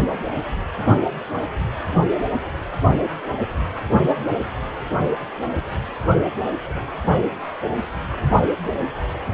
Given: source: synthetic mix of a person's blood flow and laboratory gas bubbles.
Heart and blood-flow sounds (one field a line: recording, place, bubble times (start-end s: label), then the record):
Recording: Doppler ultrasound of blood flow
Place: precordium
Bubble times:
no bubbles
From the record:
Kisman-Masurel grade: 000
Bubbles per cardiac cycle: 0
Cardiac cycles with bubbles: 0%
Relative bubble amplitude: no bubbles discernible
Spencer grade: 0 (complete lack of bubble signals)